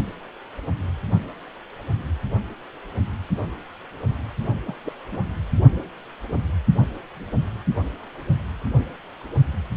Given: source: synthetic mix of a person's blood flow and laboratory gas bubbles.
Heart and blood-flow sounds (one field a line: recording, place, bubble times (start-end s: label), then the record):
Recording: Doppler ultrasound of blood flow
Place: precordium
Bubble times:
4.67-4.75 s: bubbles
4.84-4.92 s: bubbles
5.12-5.25 s: bubbles
From the record:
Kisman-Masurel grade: 221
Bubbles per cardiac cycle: several, 3 to 8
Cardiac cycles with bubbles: 10 to 50%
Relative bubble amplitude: barely perceptible (0.100 to 0.250)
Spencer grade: 2 (many but less than half of the cardiac periods contain bubble signals, singularly or in groups)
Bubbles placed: only in the low amplitude regions of the cardiac cycle